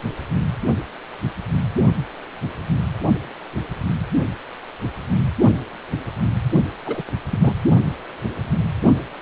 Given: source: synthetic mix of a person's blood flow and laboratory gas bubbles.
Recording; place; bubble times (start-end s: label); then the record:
Doppler ultrasound of blood flow; precordium
6.85-7.02 s: bubbles
7.30-7.54 s: bubbles
From the record:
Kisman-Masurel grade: 212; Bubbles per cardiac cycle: several, 3 to 8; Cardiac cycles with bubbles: 1 to 10%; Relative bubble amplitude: moderate (0.250 to 0.450); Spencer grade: 1 (occasional bubble signal discernible with the cardiac motion signal, with majority of cardiac periods free of bubbles); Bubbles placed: only in the low amplitude regions of the cardiac cycle